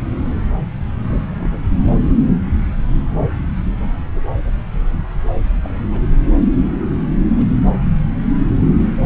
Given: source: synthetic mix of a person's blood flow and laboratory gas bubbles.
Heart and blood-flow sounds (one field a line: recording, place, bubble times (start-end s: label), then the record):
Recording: Doppler ultrasound of blood flow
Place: subclavian vein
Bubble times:
1.07-1.21 s: bubbles
1.29-1.61 s: bubbles
5.35-5.41 s: bubbles
5.52-5.60 s: bubbles
5.62-5.82 s: bubbles
5.84-6.01 s: bubbles
7.28-7.46 s: bubbles
7.57-7.69 s: bubbles
From the record:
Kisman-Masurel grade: 221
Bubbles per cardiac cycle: several, 3 to 8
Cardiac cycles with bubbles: 10 to 50%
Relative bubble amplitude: barely perceptible (0.100 to 0.250)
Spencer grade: 2 (many but less than half of the cardiac periods contain bubble signals, singularly or in groups)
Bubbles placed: anywhere in the cardiac cycle